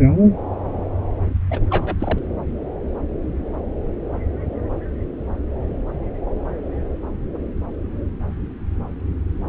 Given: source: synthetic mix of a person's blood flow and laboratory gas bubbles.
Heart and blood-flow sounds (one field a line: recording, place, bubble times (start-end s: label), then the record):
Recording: Doppler ultrasound of blood flow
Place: subclavian vein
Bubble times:
1.50-1.59 s: bubbles
1.70-1.97 s: bubbles
1.99-2.19 s: bubbles
From the record:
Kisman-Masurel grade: 212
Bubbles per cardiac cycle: several, 3 to 8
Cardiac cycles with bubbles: 1 to 10%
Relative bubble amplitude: moderate (0.250 to 0.450)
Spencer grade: 1 (occasional bubble signal discernible with the cardiac motion signal, with majority of cardiac periods free of bubbles)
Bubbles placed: anywhere in the cardiac cycle